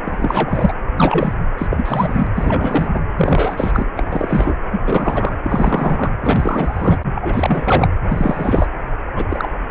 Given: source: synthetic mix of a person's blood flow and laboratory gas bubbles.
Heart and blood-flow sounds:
Doppler ultrasound of blood flow; precordium
0.04-0.72 s: bubbles
0.97-1.34 s: bubbles
1.58-1.67 s: bubbles
1.70-2.27 s: bubbles
2.35-2.90 s: bubbles
2.93-3.01 s: bubbles
3.17-3.86 s: bubbles
3.96-4.56 s: bubbles
4.72-4.81 s: bubbles
4.85-5.36 s: bubbles
5.44-6.13 s: bubbles
6.23-6.98 s: bubbles
7.15-7.88 s: bubbles
8.08-8.67 s: bubbles
9.15-9.26 s: bubbles
9.28-9.48 s: bubbles
From the record:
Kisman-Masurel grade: 333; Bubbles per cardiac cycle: rolling drumbeat, 9 or more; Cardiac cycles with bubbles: 50 to 99%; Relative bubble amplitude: loud (0.450 to 0.775); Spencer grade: 3 (all of the cardiac periods contain showers or single bubble signals, but not dominating or overriding the cardiac motion signals); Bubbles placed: anywhere in the cardiac cycle

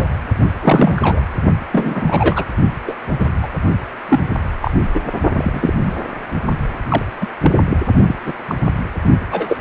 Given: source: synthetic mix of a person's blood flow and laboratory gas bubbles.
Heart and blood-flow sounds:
Doppler ultrasound of blood flow; precordium
0.00-0.18 s: bubbles
0.62-1.21 s: bubbles
1.71-2.45 s: bubbles
2.87-2.94 s: bubbles
3.20-3.29 s: bubbles
3.42-3.48 s: bubbles
4.08-4.20 s: bubbles
4.61-4.71 s: bubbles
4.94-5.01 s: bubbles
5.35-5.71 s: bubbles
5.83-5.93 s: bubbles
6.88-7.02 s: bubbles
7.21-7.26 s: bubbles
7.42-7.51 s: bubbles
7.69-7.77 s: bubbles
8.07-8.16 s: bubbles
8.24-8.33 s: bubbles
8.48-8.56 s: bubbles
9.31-9.61 s: bubbles
From the record:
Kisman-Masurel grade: 243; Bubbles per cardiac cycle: several, 3 to 8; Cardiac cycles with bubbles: 100%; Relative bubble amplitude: loud (0.450 to 0.775); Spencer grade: 3 (all of the cardiac periods contain showers or single bubble signals, but not dominating or overriding the cardiac motion signals); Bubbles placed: only in the low amplitude regions of the cardiac cycle

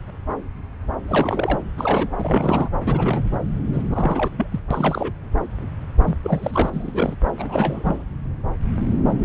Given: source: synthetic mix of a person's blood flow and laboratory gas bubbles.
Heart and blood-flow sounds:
Doppler ultrasound of blood flow; subclavian vein
1.07-1.59 s: bubbles
1.78-2.13 s: bubbles
2.17-2.69 s: bubbles
2.83-3.23 s: bubbles
3.32-3.39 s: bubbles
3.73-3.83 s: bubbles
3.90-4.30 s: bubbles
4.38-4.46 s: bubbles
4.51-4.60 s: bubbles
4.71-5.12 s: bubbles
6.02-6.16 s: bubbles
6.23-6.71 s: bubbles
6.73-7.15 s: bubbles
7.38-8.04 s: bubbles
From the record:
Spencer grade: 3 (all of the cardiac periods contain showers or single bubble signals, but not dominating or overriding the cardiac motion signals); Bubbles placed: anywhere in the cardiac cycle

